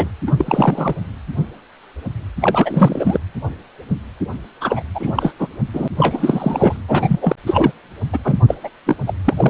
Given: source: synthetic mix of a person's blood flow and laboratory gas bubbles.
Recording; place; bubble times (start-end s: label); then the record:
Doppler ultrasound of blood flow; precordium
0.00-0.11 s: bubbles
0.27-0.32 s: bubbles
0.38-0.95 s: bubbles
2.40-3.18 s: bubbles
4.61-4.82 s: bubbles
4.95-5.12 s: bubbles
5.15-5.32 s: bubbles
5.39-5.48 s: bubbles
5.74-5.88 s: bubbles
5.98-6.77 s: bubbles
6.88-7.36 s: bubbles
7.46-7.71 s: bubbles
8.12-8.18 s: bubbles
8.24-8.35 s: bubbles
8.47-8.54 s: bubbles
8.63-8.69 s: bubbles
8.86-8.96 s: bubbles
9.06-9.13 s: bubbles
9.24-9.50 s: bubbles
From the record:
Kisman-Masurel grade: 333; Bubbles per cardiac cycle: rolling drumbeat, 9 or more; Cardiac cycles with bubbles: 50 to 99%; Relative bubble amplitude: loud (0.450 to 0.775); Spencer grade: 3 (all of the cardiac periods contain showers or single bubble signals, but not dominating or overriding the cardiac motion signals); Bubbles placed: anywhere in the cardiac cycle